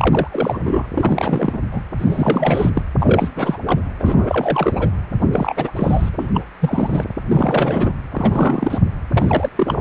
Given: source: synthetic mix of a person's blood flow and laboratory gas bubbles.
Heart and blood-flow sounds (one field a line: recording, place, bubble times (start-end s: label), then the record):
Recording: Doppler ultrasound of blood flow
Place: precordium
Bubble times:
0.00-0.28 s: bubbles
0.31-0.87 s: bubbles
0.95-1.59 s: bubbles
1.72-1.83 s: bubbles
1.98-2.70 s: bubbles
2.75-2.83 s: bubbles
3.00-3.31 s: bubbles
3.36-3.57 s: bubbles
3.66-3.81 s: bubbles
3.99-4.89 s: bubbles
5.21-5.24 s: bubbles
5.32-5.71 s: bubbles
5.75-6.10 s: bubbles
6.13-6.28 s: bubbles
6.33-6.41 s: bubbles
6.60-7.04 s: bubbles
7.28-7.93 s: bubbles
8.12-8.79 s: bubbles
9.13-9.50 s: bubbles
9.55-9.81 s: bubbles
From the record:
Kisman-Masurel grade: 342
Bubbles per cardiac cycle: rolling drumbeat, 9 or more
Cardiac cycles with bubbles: 100%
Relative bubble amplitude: moderate (0.250 to 0.450)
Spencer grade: 3 (all of the cardiac periods contain showers or single bubble signals, but not dominating or overriding the cardiac motion signals)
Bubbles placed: anywhere in the cardiac cycle